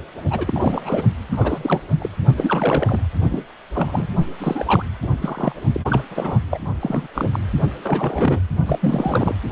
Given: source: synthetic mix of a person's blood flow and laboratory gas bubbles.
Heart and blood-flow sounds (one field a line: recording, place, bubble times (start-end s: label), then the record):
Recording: Doppler ultrasound of blood flow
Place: precordium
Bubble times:
0.30-1.03 s: bubbles
1.31-1.81 s: bubbles
1.99-2.09 s: bubbles
2.38-3.00 s: bubbles
3.29-3.44 s: bubbles
3.73-4.06 s: bubbles
4.38-4.84 s: bubbles
5.02-5.14 s: bubbles
5.21-5.52 s: bubbles
5.72-5.80 s: bubbles
5.88-6.04 s: bubbles
6.10-6.39 s: bubbles
6.50-6.58 s: bubbles
6.79-7.08 s: bubbles
7.14-7.29 s: bubbles
7.32-7.39 s: bubbles
7.83-8.39 s: bubbles
8.65-8.79 s: bubbles
8.81-9.34 s: bubbles
From the record:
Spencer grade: 3 (all of the cardiac periods contain showers or single bubble signals, but not dominating or overriding the cardiac motion signals)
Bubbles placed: only in the low amplitude regions of the cardiac cycle